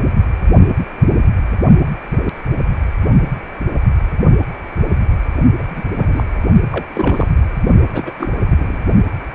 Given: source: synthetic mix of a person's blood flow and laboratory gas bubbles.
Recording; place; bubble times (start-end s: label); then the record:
Doppler ultrasound of blood flow; precordium
5.58-5.64 s: bubbles
5.69-5.84 s: bubbles
5.96-6.24 s: bubbles
6.72-6.86 s: bubbles
6.95-7.29 s: bubbles
7.36-7.43 s: bubbles
7.91-8.11 s: bubbles
8.19-8.29 s: bubbles
8.50-8.80 s: bubbles
From the record:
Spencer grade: 2 (many but less than half of the cardiac periods contain bubble signals, singularly or in groups); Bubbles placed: only in the low amplitude regions of the cardiac cycle